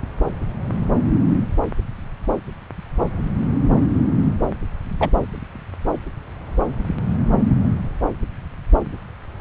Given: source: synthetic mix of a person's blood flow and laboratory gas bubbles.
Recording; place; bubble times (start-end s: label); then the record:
Doppler ultrasound of blood flow; subclavian vein
5.00-5.09 s: bubbles
From the record:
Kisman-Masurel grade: 123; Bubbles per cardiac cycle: 1 to 2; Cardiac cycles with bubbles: 10 to 50%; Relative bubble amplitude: loud (0.450 to 0.775); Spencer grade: 2 (many but less than half of the cardiac periods contain bubble signals, singularly or in groups); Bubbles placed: anywhere in the cardiac cycle